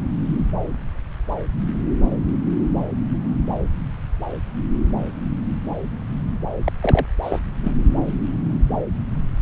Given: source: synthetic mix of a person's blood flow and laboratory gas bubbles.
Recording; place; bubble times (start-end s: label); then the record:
Doppler ultrasound of blood flow; subclavian vein
6.64-6.72 s: bubbles
6.81-7.05 s: bubbles
7.22-7.39 s: bubbles
7.63-7.72 s: bubbles
From the record:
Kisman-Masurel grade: 122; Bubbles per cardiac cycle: 1 to 2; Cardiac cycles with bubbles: 10 to 50%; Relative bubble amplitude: moderate (0.250 to 0.450); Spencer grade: 2 (many but less than half of the cardiac periods contain bubble signals, singularly or in groups); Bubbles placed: anywhere in the cardiac cycle